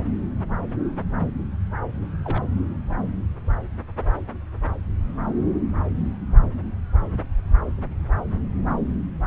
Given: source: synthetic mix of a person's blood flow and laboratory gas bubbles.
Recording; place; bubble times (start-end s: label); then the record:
Doppler ultrasound of blood flow; subclavian vein
2.25-2.43 s: bubbles
From the record:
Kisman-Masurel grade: 111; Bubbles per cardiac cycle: 1 to 2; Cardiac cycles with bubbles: 1 to 10%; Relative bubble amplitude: barely perceptible (0.100 to 0.250); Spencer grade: 1 (occasional bubble signal discernible with the cardiac motion signal, with majority of cardiac periods free of bubbles); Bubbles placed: anywhere in the cardiac cycle